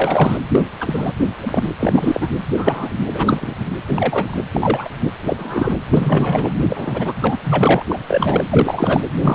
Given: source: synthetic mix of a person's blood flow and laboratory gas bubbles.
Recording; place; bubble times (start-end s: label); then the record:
Doppler ultrasound of blood flow; precordium
0.00-0.37 s: bubbles
0.49-0.68 s: bubbles
0.80-1.12 s: bubbles
1.42-1.74 s: bubbles
1.80-2.28 s: bubbles
2.56-2.89 s: bubbles
3.13-3.53 s: bubbles
3.87-4.38 s: bubbles
4.52-4.88 s: bubbles
5.26-5.77 s: bubbles
5.89-6.54 s: bubbles
6.67-7.13 s: bubbles
7.21-7.38 s: bubbles
7.43-7.83 s: bubbles
7.89-7.99 s: bubbles
8.08-8.44 s: bubbles
8.51-9.03 s: bubbles
9.22-9.35 s: bubbles
From the record:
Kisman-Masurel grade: 243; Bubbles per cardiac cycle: several, 3 to 8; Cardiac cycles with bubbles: 100%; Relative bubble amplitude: loud (0.450 to 0.775); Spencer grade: 3 (all of the cardiac periods contain showers or single bubble signals, but not dominating or overriding the cardiac motion signals); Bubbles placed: anywhere in the cardiac cycle